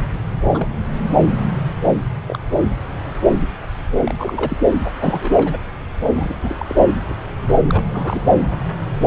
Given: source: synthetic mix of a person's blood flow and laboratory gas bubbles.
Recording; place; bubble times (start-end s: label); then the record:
Doppler ultrasound of blood flow; subclavian vein
0.40-0.68 s: bubbles
2.29-2.39 s: bubbles
2.58-2.65 s: bubbles
4.04-4.14 s: bubbles
4.17-4.56 s: bubbles
5.00-5.58 s: bubbles
6.04-6.90 s: bubbles
7.09-7.13 s: bubbles
7.42-7.55 s: bubbles
7.62-7.84 s: bubbles
7.94-8.21 s: bubbles
From the record:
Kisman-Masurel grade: 232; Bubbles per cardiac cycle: several, 3 to 8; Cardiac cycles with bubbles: 50 to 99%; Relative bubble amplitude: moderate (0.250 to 0.450); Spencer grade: 3 (all of the cardiac periods contain showers or single bubble signals, but not dominating or overriding the cardiac motion signals); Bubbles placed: anywhere in the cardiac cycle